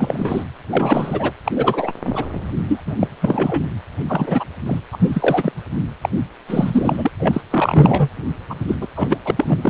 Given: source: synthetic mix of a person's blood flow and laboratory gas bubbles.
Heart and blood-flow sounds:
Doppler ultrasound of blood flow; precordium
0.00-0.44 s: bubbles
0.70-1.32 s: bubbles
1.44-1.52 s: bubbles
1.55-1.93 s: bubbles
2.06-2.25 s: bubbles
2.67-2.80 s: bubbles
2.86-2.96 s: bubbles
2.99-3.08 s: bubbles
3.21-3.64 s: bubbles
4.01-4.03 s: bubbles
4.08-4.44 s: bubbles
4.66-4.79 s: bubbles
4.92-5.52 s: bubbles
6.01-6.09 s: bubbles
6.48-7.10 s: bubbles
7.19-7.41 s: bubbles
7.50-8.09 s: bubbles
8.49-8.55 s: bubbles
8.68-8.75 s: bubbles
8.81-8.88 s: bubbles
8.96-9.18 s: bubbles
9.25-9.32 s: bubbles
9.37-9.70 s: bubbles
From the record:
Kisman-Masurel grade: 343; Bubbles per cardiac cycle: rolling drumbeat, 9 or more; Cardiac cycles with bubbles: 100%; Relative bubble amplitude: loud (0.450 to 0.775); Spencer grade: 3 (all of the cardiac periods contain showers or single bubble signals, but not dominating or overriding the cardiac motion signals); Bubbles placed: anywhere in the cardiac cycle

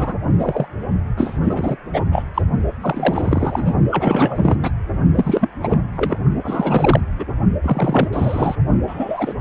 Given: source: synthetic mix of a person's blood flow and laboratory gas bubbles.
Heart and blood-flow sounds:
Doppler ultrasound of blood flow; precordium
0.00-0.15 s: bubbles
0.38-0.67 s: bubbles
1.17-1.39 s: bubbles
1.41-1.77 s: bubbles
1.94-2.02 s: bubbles
2.11-2.23 s: bubbles
2.34-2.42 s: bubbles
2.80-3.75 s: bubbles
3.91-4.71 s: bubbles
5.14-5.50 s: bubbles
5.60-5.78 s: bubbles
5.95-6.18 s: bubbles
6.43-7.00 s: bubbles
7.19-7.25 s: bubbles
7.62-8.55 s: bubbles
8.87-9.34 s: bubbles
From the record:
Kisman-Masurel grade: 342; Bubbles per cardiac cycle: rolling drumbeat, 9 or more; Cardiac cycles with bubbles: 100%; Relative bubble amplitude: moderate (0.250 to 0.450); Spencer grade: 3 (all of the cardiac periods contain showers or single bubble signals, but not dominating or overriding the cardiac motion signals); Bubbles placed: only in the low amplitude regions of the cardiac cycle

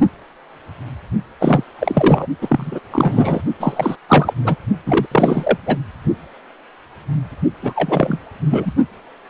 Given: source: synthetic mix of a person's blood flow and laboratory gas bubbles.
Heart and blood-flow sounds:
Doppler ultrasound of blood flow; precordium
1.40-1.64 s: bubbles
1.79-2.27 s: bubbles
2.41-2.79 s: bubbles
2.91-3.41 s: bubbles
3.60-3.96 s: bubbles
4.08-4.33 s: bubbles
4.45-4.55 s: bubbles
4.86-5.06 s: bubbles
5.11-5.58 s: bubbles
5.66-5.78 s: bubbles
7.61-8.19 s: bubbles
8.50-8.73 s: bubbles
From the record:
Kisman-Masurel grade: 333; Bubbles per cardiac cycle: rolling drumbeat, 9 or more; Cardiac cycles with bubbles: 50 to 99%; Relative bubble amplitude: loud (0.450 to 0.775); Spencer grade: 3 (all of the cardiac periods contain showers or single bubble signals, but not dominating or overriding the cardiac motion signals); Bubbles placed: only in the low amplitude regions of the cardiac cycle

